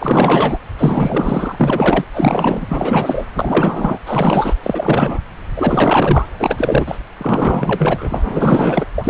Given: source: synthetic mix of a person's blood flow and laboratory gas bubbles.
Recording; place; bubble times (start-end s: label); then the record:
Doppler ultrasound of blood flow; subclavian vein
0.00-0.58 s: bubbles
0.78-2.05 s: bubbles
2.13-3.25 s: bubbles
3.34-3.98 s: bubbles
4.05-4.54 s: bubbles
4.63-5.21 s: bubbles
5.56-6.26 s: bubbles
6.39-6.98 s: bubbles
7.17-8.85 s: bubbles
8.97-9.10 s: bubbles
From the record:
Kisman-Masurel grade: 444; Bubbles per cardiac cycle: continuous sound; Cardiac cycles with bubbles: 100%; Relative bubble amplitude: maximal (0.775 to 0.999); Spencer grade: 4 (maximum detectable bubble signal sounding continuously throughout systole and diastole of every cardiac period, and overriding the amplitude of the normal cardiac signals); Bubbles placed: anywhere in the cardiac cycle